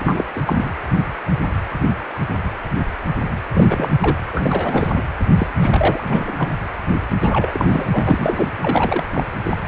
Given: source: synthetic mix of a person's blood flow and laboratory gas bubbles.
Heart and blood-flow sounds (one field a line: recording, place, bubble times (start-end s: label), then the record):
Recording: Doppler ultrasound of blood flow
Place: precordium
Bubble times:
0.00-0.25 s: bubbles
0.35-0.41 s: bubbles
0.46-0.70 s: bubbles
3.52-3.92 s: bubbles
4.00-4.17 s: bubbles
4.33-4.92 s: bubbles
4.94-5.02 s: bubbles
5.36-5.47 s: bubbles
5.60-6.32 s: bubbles
6.36-6.49 s: bubbles
7.21-8.50 s: bubbles
8.61-9.08 s: bubbles
9.14-9.23 s: bubbles
9.42-9.57 s: bubbles
9.64-9.68 s: bubbles
From the record:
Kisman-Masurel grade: 332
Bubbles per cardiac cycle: rolling drumbeat, 9 or more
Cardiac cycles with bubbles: 50 to 99%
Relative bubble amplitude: moderate (0.250 to 0.450)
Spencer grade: 3 (all of the cardiac periods contain showers or single bubble signals, but not dominating or overriding the cardiac motion signals)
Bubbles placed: anywhere in the cardiac cycle